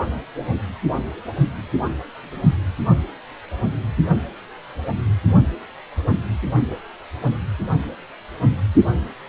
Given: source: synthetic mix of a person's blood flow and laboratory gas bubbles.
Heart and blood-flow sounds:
Doppler ultrasound of blood flow; precordium
no bubbles
From the record:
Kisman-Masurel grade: 000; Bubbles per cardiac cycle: 0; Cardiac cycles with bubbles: 0%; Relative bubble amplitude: no bubbles discernible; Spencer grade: 0 (complete lack of bubble signals)

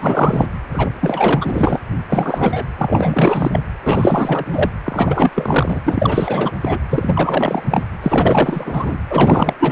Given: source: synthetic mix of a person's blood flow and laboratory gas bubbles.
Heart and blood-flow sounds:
Doppler ultrasound of blood flow; precordium
0.00-0.48 s: bubbles
0.72-0.90 s: bubbles
1.00-1.79 s: bubbles
2.09-2.65 s: bubbles
2.77-3.62 s: bubbles
3.84-4.45 s: bubbles
4.48-4.70 s: bubbles
4.83-5.32 s: bubbles
5.35-5.81 s: bubbles
5.87-6.52 s: bubbles
6.61-6.79 s: bubbles
6.90-7.83 s: bubbles
8.03-8.97 s: bubbles
9.10-9.54 s: bubbles
9.60-9.72 s: bubbles
From the record:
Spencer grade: 4 (maximum detectable bubble signal sounding continuously throughout systole and diastole of every cardiac period, and overriding the amplitude of the normal cardiac signals); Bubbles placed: anywhere in the cardiac cycle

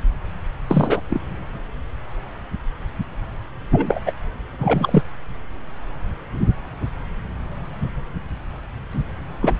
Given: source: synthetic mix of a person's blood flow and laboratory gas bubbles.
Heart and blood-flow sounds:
Doppler ultrasound of blood flow; subclavian vein
0.68-1.02 s: bubbles
1.09-1.21 s: bubbles
3.72-4.00 s: bubbles
4.05-4.12 s: bubbles
4.58-5.03 s: bubbles
8.90-9.04 s: bubbles
9.41-9.57 s: bubbles
From the record:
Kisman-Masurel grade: 223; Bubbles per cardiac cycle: several, 3 to 8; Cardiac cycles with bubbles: 10 to 50%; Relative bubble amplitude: loud (0.450 to 0.775); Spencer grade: 2 (many but less than half of the cardiac periods contain bubble signals, singularly or in groups); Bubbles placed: anywhere in the cardiac cycle

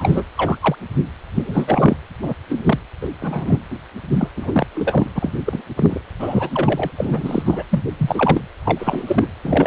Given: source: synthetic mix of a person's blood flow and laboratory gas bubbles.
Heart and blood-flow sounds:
Doppler ultrasound of blood flow; precordium
0.00-0.25 s: bubbles
0.37-0.58 s: bubbles
0.60-0.75 s: bubbles
1.35-1.97 s: bubbles
2.22-2.33 s: bubbles
2.49-2.79 s: bubbles
3.01-3.08 s: bubbles
3.22-3.58 s: bubbles
4.13-4.28 s: bubbles
4.36-4.67 s: bubbles
4.75-5.10 s: bubbles
5.14-5.34 s: bubbles
5.45-5.62 s: bubbles
5.75-6.01 s: bubbles
6.19-6.91 s: bubbles
6.97-7.43 s: bubbles
7.46-7.63 s: bubbles
7.69-7.83 s: bubbles
7.98-8.41 s: bubbles
8.64-9.27 s: bubbles
9.44-9.67 s: bubbles
From the record:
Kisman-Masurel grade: 243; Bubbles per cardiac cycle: several, 3 to 8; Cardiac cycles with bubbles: 100%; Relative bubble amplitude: loud (0.450 to 0.775); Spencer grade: 3 (all of the cardiac periods contain showers or single bubble signals, but not dominating or overriding the cardiac motion signals); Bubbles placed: anywhere in the cardiac cycle

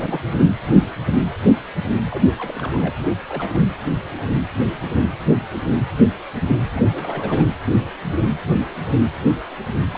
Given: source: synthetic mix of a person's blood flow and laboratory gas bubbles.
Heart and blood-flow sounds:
Doppler ultrasound of blood flow; precordium
0.00-0.35 s: bubbles
2.10-2.25 s: bubbles
2.38-2.90 s: bubbles
2.95-2.99 s: bubbles
3.02-3.18 s: bubbles
3.27-3.62 s: bubbles
6.67-6.81 s: bubbles
6.89-7.53 s: bubbles
9.90-9.98 s: bubbles
From the record:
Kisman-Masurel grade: 221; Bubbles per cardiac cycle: several, 3 to 8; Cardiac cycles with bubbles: 10 to 50%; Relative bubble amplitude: barely perceptible (0.100 to 0.250); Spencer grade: 2 (many but less than half of the cardiac periods contain bubble signals, singularly or in groups); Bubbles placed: anywhere in the cardiac cycle

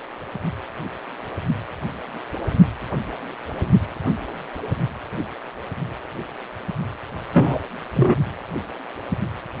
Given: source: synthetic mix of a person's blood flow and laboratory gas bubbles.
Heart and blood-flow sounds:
Doppler ultrasound of blood flow; precordium
7.33-7.60 s: bubbles
7.96-8.15 s: bubbles
From the record:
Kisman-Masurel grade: 113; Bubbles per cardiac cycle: 1 to 2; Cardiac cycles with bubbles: 1 to 10%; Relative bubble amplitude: loud (0.450 to 0.775); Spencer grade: 1 (occasional bubble signal discernible with the cardiac motion signal, with majority of cardiac periods free of bubbles); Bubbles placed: only in the low amplitude regions of the cardiac cycle

